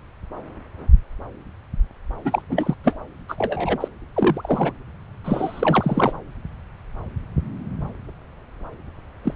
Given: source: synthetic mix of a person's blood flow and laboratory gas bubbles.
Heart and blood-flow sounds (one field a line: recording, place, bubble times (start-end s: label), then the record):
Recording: Doppler ultrasound of blood flow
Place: subclavian vein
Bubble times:
2.25-2.42 s: bubbles
2.49-2.75 s: bubbles
2.83-2.97 s: bubbles
3.28-3.88 s: bubbles
4.15-4.72 s: bubbles
5.24-6.13 s: bubbles
9.23-9.33 s: bubbles
From the record:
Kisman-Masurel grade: 232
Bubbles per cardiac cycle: several, 3 to 8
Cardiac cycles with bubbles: 50 to 99%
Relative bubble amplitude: moderate (0.250 to 0.450)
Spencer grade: 3 (all of the cardiac periods contain showers or single bubble signals, but not dominating or overriding the cardiac motion signals)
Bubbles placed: anywhere in the cardiac cycle